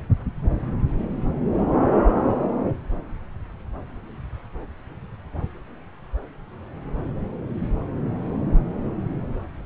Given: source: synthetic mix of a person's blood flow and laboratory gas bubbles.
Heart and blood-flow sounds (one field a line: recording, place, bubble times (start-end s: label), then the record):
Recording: Doppler ultrasound of blood flow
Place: subclavian vein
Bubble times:
no bubbles
From the record:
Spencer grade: 0 (complete lack of bubble signals)